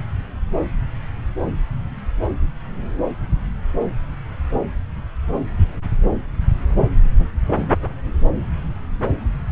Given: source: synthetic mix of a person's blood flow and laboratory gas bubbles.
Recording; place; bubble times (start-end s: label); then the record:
Doppler ultrasound of blood flow; subclavian vein
7.18-7.30 s: bubbles
From the record:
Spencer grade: 1 (occasional bubble signal discernible with the cardiac motion signal, with majority of cardiac periods free of bubbles); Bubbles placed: anywhere in the cardiac cycle